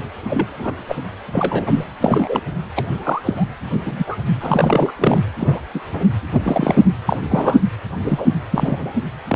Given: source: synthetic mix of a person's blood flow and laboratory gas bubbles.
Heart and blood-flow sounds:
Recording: Doppler ultrasound of blood flow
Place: precordium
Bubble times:
0.27-0.74 s: bubbles
0.88-0.96 s: bubbles
1.32-1.85 s: bubbles
2.02-2.40 s: bubbles
2.75-2.87 s: bubbles
2.97-3.46 s: bubbles
3.80-4.17 s: bubbles
4.40-4.92 s: bubbles
4.99-5.18 s: bubbles
5.40-5.61 s: bubbles
5.74-5.80 s: bubbles
5.93-6.05 s: bubbles
6.32-6.85 s: bubbles
7.08-7.18 s: bubbles
7.20-7.62 s: bubbles
8.03-8.27 s: bubbles
8.50-8.92 s: bubbles
9.28-9.36 s: bubbles
From the record:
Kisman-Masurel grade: 243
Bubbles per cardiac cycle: several, 3 to 8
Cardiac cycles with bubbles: 100%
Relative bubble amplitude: loud (0.450 to 0.775)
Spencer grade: 3 (all of the cardiac periods contain showers or single bubble signals, but not dominating or overriding the cardiac motion signals)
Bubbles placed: anywhere in the cardiac cycle

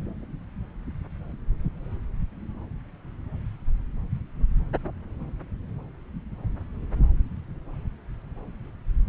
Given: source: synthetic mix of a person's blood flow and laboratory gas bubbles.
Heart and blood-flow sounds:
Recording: Doppler ultrasound of blood flow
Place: subclavian vein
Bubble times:
no bubbles
From the record:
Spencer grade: 0 (complete lack of bubble signals)

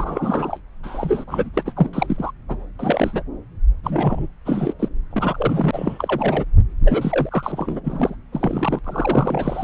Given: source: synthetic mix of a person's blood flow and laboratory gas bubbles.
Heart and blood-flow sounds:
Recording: Doppler ultrasound of blood flow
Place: subclavian vein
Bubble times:
0.00-0.59 s: bubbles
0.83-1.24 s: bubbles
1.27-1.49 s: bubbles
1.53-1.72 s: bubbles
1.76-1.89 s: bubbles
1.93-2.31 s: bubbles
2.48-2.56 s: bubbles
2.79-3.23 s: bubbles
3.83-4.27 s: bubbles
4.46-4.73 s: bubbles
4.79-4.88 s: bubbles
5.11-6.44 s: bubbles
6.80-7.80 s: bubbles
7.83-8.16 s: bubbles
8.33-8.79 s: bubbles
8.84-9.63 s: bubbles
From the record:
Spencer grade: 3 (all of the cardiac periods contain showers or single bubble signals, but not dominating or overriding the cardiac motion signals)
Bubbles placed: anywhere in the cardiac cycle

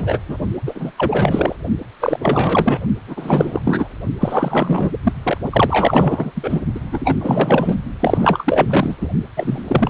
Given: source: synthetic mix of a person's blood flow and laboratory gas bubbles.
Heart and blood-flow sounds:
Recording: Doppler ultrasound of blood flow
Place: precordium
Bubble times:
0.00-0.19 s: bubbles
0.28-0.38 s: bubbles
0.66-0.92 s: bubbles
0.97-1.55 s: bubbles
2.00-2.79 s: bubbles
3.08-3.62 s: bubbles
3.64-3.88 s: bubbles
4.20-4.97 s: bubbles
5.03-5.13 s: bubbles
5.23-5.38 s: bubbles
5.50-6.32 s: bubbles
6.35-6.60 s: bubbles
6.75-6.79 s: bubbles
6.92-7.15 s: bubbles
7.20-7.75 s: bubbles
8.00-8.96 s: bubbles
9.01-9.08 s: bubbles
9.37-9.63 s: bubbles
9.68-9.90 s: bubbles
From the record:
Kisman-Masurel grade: 444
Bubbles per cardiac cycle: continuous sound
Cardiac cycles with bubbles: 100%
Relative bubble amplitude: maximal (0.775 to 0.999)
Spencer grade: 4 (maximum detectable bubble signal sounding continuously throughout systole and diastole of every cardiac period, and overriding the amplitude of the normal cardiac signals)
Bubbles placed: only in the low amplitude regions of the cardiac cycle

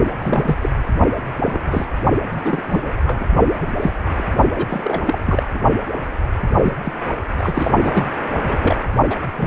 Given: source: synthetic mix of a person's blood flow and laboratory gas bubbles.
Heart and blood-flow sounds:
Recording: Doppler ultrasound of blood flow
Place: precordium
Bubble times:
0.18-0.57 s: bubbles
0.61-0.70 s: bubbles
1.44-1.85 s: bubbles
2.31-2.62 s: bubbles
2.67-2.93 s: bubbles
3.06-3.25 s: bubbles
3.62-3.71 s: bubbles
3.80-3.91 s: bubbles
4.17-4.24 s: bubbles
4.56-4.66 s: bubbles
4.68-5.19 s: bubbles
5.25-5.48 s: bubbles
5.54-5.61 s: bubbles
6.54-6.73 s: bubbles
6.84-6.92 s: bubbles
7.38-7.71 s: bubbles
7.82-8.10 s: bubbles
8.35-8.57 s: bubbles
8.62-8.77 s: bubbles
9.10-9.15 s: bubbles
9.37-9.47 s: bubbles
From the record:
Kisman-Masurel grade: 232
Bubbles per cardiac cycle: several, 3 to 8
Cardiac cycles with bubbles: 50 to 99%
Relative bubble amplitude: moderate (0.250 to 0.450)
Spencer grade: 3 (all of the cardiac periods contain showers or single bubble signals, but not dominating or overriding the cardiac motion signals)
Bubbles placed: only in the low amplitude regions of the cardiac cycle

